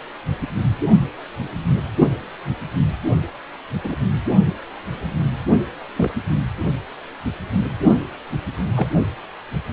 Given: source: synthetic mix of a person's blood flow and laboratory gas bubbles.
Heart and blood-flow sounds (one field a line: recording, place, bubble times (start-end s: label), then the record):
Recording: Doppler ultrasound of blood flow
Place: precordium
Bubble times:
3.83-3.97 s: bubbles
5.96-6.11 s: bubbles
8.75-8.87 s: bubbles
From the record:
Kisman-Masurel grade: 122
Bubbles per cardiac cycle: 1 to 2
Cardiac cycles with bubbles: 10 to 50%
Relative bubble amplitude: moderate (0.250 to 0.450)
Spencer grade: 2 (many but less than half of the cardiac periods contain bubble signals, singularly or in groups)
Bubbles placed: only in the low amplitude regions of the cardiac cycle